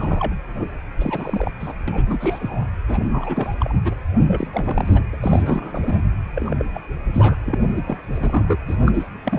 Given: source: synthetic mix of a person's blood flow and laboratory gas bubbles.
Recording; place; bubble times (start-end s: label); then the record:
Doppler ultrasound of blood flow; precordium
0.00-0.34 s: bubbles
0.55-0.68 s: bubbles
0.98-1.52 s: bubbles
1.60-1.73 s: bubbles
1.88-2.67 s: bubbles
2.87-3.56 s: bubbles
3.60-3.74 s: bubbles
3.84-3.96 s: bubbles
4.27-4.48 s: bubbles
4.50-5.04 s: bubbles
5.12-5.17 s: bubbles
5.21-6.04 s: bubbles
6.35-6.66 s: bubbles
6.74-6.81 s: bubbles
7.14-7.36 s: bubbles
7.46-8.59 s: bubbles
8.67-8.77 s: bubbles
8.85-9.09 s: bubbles
9.24-9.39 s: bubbles
From the record:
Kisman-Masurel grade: 332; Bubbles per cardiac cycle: rolling drumbeat, 9 or more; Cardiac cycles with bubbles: 50 to 99%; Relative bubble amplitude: moderate (0.250 to 0.450); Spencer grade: 3 (all of the cardiac periods contain showers or single bubble signals, but not dominating or overriding the cardiac motion signals); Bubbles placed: anywhere in the cardiac cycle